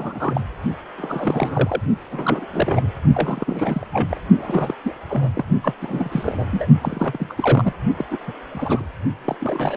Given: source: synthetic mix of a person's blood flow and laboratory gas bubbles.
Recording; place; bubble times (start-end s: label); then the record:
Doppler ultrasound of blood flow; precordium
0.00-0.41 s: bubbles
0.97-1.81 s: bubbles
2.11-2.46 s: bubbles
2.52-2.88 s: bubbles
3.15-3.87 s: bubbles
3.93-4.21 s: bubbles
4.35-4.75 s: bubbles
4.84-4.93 s: bubbles
5.09-5.30 s: bubbles
5.33-5.45 s: bubbles
5.62-5.74 s: bubbles
5.81-6.44 s: bubbles
6.51-6.67 s: bubbles
6.81-7.33 s: bubbles
7.37-7.73 s: bubbles
7.96-8.05 s: bubbles
8.11-8.18 s: bubbles
8.27-8.33 s: bubbles
8.53-8.87 s: bubbles
9.24-9.36 s: bubbles
9.40-9.77 s: bubbles
From the record:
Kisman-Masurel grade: 342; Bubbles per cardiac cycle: rolling drumbeat, 9 or more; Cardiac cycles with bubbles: 100%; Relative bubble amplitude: moderate (0.250 to 0.450); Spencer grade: 3 (all of the cardiac periods contain showers or single bubble signals, but not dominating or overriding the cardiac motion signals); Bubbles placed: only in the low amplitude regions of the cardiac cycle